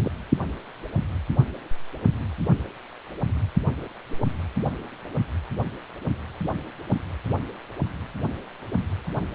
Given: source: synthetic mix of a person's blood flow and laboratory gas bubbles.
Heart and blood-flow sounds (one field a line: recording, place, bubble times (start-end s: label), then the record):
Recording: Doppler ultrasound of blood flow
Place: precordium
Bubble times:
0.03-0.12 s: bubbles
From the record:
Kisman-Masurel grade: 211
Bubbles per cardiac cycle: several, 3 to 8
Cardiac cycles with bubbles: 1 to 10%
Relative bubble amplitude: barely perceptible (0.100 to 0.250)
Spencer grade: 1 (occasional bubble signal discernible with the cardiac motion signal, with majority of cardiac periods free of bubbles)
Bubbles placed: anywhere in the cardiac cycle